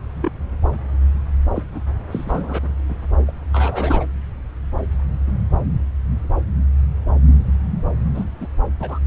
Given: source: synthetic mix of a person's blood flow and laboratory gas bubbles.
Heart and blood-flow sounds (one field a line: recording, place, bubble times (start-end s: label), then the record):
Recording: Doppler ultrasound of blood flow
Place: subclavian vein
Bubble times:
0.16-0.31 s: bubbles
1.55-1.63 s: bubbles
1.72-1.81 s: bubbles
2.11-2.58 s: bubbles
2.62-2.72 s: bubbles
2.89-2.99 s: bubbles
3.27-3.32 s: bubbles
3.53-4.06 s: bubbles
8.14-8.24 s: bubbles
8.40-8.46 s: bubbles
8.79-8.98 s: bubbles
From the record:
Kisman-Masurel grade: 221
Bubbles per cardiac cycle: several, 3 to 8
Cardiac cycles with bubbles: 10 to 50%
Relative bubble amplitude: barely perceptible (0.100 to 0.250)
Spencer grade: 2 (many but less than half of the cardiac periods contain bubble signals, singularly or in groups)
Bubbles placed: anywhere in the cardiac cycle